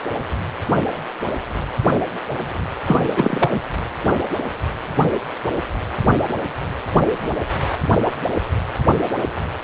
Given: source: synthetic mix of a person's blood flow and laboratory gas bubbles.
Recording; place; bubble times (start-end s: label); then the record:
Doppler ultrasound of blood flow; precordium
2.87-2.98 s: bubbles
3.08-3.49 s: bubbles
3.52-3.60 s: bubbles
From the record:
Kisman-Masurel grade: 212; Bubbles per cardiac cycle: several, 3 to 8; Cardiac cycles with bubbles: 1 to 10%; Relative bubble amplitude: moderate (0.250 to 0.450); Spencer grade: 1 (occasional bubble signal discernible with the cardiac motion signal, with majority of cardiac periods free of bubbles); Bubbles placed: anywhere in the cardiac cycle